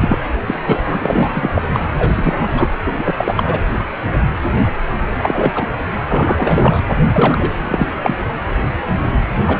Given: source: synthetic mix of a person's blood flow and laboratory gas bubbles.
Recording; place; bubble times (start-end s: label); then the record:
Doppler ultrasound of blood flow; precordium
0.01-0.16 s: bubbles
0.46-0.60 s: bubbles
0.67-1.62 s: bubbles
1.73-1.79 s: bubbles
1.98-2.68 s: bubbles
2.86-2.96 s: bubbles
2.98-3.15 s: bubbles
3.17-3.60 s: bubbles
5.19-5.66 s: bubbles
6.08-6.81 s: bubbles
7.12-7.51 s: bubbles
7.61-7.88 s: bubbles
8.02-8.14 s: bubbles
9.46-9.60 s: bubbles
From the record:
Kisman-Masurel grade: 333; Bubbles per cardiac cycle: rolling drumbeat, 9 or more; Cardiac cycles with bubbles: 50 to 99%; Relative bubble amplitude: loud (0.450 to 0.775); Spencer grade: 3 (all of the cardiac periods contain showers or single bubble signals, but not dominating or overriding the cardiac motion signals); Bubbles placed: anywhere in the cardiac cycle